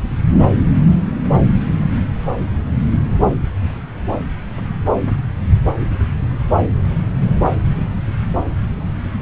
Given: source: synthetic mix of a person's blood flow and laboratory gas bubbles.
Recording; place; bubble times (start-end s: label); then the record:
Doppler ultrasound of blood flow; subclavian vein
no bubbles
From the record:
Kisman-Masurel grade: 000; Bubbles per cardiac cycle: 0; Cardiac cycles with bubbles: 0%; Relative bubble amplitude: no bubbles discernible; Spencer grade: 0 (complete lack of bubble signals)